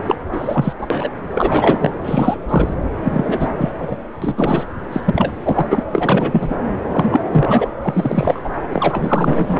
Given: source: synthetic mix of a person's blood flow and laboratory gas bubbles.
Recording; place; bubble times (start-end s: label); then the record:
Doppler ultrasound of blood flow; subclavian vein
0.06-0.16 s: bubbles
0.32-0.73 s: bubbles
0.78-1.09 s: bubbles
1.32-1.94 s: bubbles
2.03-2.37 s: bubbles
2.48-2.74 s: bubbles
3.04-3.49 s: bubbles
3.58-3.71 s: bubbles
3.78-3.97 s: bubbles
4.21-4.64 s: bubbles
4.92-5.00 s: bubbles
5.05-5.33 s: bubbles
5.43-5.67 s: bubbles
5.70-5.84 s: bubbles
5.92-6.57 s: bubbles
6.92-7.22 s: bubbles
7.31-7.68 s: bubbles
7.82-8.50 s: bubbles
8.71-9.60 s: bubbles
From the record:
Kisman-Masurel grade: 343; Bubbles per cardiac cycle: rolling drumbeat, 9 or more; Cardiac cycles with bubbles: 100%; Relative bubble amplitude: loud (0.450 to 0.775); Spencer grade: 3 (all of the cardiac periods contain showers or single bubble signals, but not dominating or overriding the cardiac motion signals); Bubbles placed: anywhere in the cardiac cycle